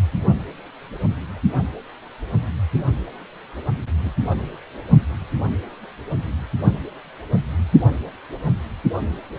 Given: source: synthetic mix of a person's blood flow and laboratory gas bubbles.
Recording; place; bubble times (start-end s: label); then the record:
Doppler ultrasound of blood flow; precordium
4.04-4.13 s: bubbles
4.28-4.42 s: bubbles
From the record:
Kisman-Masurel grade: 211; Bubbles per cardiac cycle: several, 3 to 8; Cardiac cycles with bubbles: 1 to 10%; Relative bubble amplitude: barely perceptible (0.100 to 0.250); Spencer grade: 1 (occasional bubble signal discernible with the cardiac motion signal, with majority of cardiac periods free of bubbles); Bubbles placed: only in the low amplitude regions of the cardiac cycle